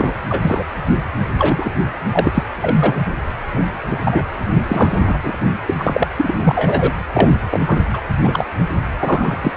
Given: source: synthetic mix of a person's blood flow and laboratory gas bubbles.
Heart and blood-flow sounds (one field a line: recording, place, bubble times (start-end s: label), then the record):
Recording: Doppler ultrasound of blood flow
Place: precordium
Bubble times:
0.00-0.13 s: bubbles
0.29-0.64 s: bubbles
1.38-1.72 s: bubbles
2.05-2.43 s: bubbles
2.60-3.15 s: bubbles
3.51-3.65 s: bubbles
3.90-3.97 s: bubbles
4.04-4.25 s: bubbles
4.63-5.19 s: bubbles
5.24-5.33 s: bubbles
5.67-6.08 s: bubbles
6.17-6.35 s: bubbles
6.44-6.94 s: bubbles
7.13-7.33 s: bubbles
7.50-7.83 s: bubbles
7.93-8.01 s: bubbles
8.23-8.47 s: bubbles
8.58-8.63 s: bubbles
8.99-9.52 s: bubbles
From the record:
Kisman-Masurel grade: 243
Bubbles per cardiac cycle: several, 3 to 8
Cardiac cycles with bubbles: 100%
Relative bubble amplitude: loud (0.450 to 0.775)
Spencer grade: 3 (all of the cardiac periods contain showers or single bubble signals, but not dominating or overriding the cardiac motion signals)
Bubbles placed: anywhere in the cardiac cycle